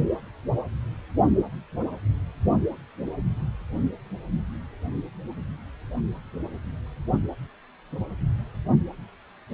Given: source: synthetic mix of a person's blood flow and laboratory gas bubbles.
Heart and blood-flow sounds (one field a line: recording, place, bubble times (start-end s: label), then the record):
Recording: Doppler ultrasound of blood flow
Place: precordium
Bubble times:
no bubbles
From the record:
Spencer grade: 0 (complete lack of bubble signals)